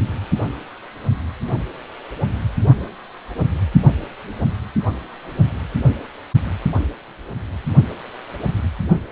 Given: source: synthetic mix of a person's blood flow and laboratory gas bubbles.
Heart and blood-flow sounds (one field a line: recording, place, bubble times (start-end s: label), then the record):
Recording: Doppler ultrasound of blood flow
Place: precordium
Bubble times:
no bubbles
From the record:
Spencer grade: 0 (complete lack of bubble signals)